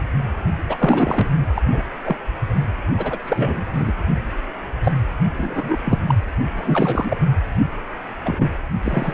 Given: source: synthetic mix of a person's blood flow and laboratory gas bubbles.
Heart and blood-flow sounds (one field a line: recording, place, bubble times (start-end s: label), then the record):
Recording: Doppler ultrasound of blood flow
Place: precordium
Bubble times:
0.69-1.31 s: bubbles
1.55-1.62 s: bubbles
1.72-1.82 s: bubbles
2.05-2.16 s: bubbles
2.97-3.17 s: bubbles
3.25-3.65 s: bubbles
3.73-3.92 s: bubbles
4.83-4.92 s: bubbles
5.38-5.77 s: bubbles
5.84-5.98 s: bubbles
6.07-6.15 s: bubbles
6.58-7.21 s: bubbles
8.25-8.49 s: bubbles
8.82-9.13 s: bubbles
From the record:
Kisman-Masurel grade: 242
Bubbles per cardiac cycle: several, 3 to 8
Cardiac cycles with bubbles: 100%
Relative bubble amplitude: moderate (0.250 to 0.450)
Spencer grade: 3 (all of the cardiac periods contain showers or single bubble signals, but not dominating or overriding the cardiac motion signals)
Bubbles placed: anywhere in the cardiac cycle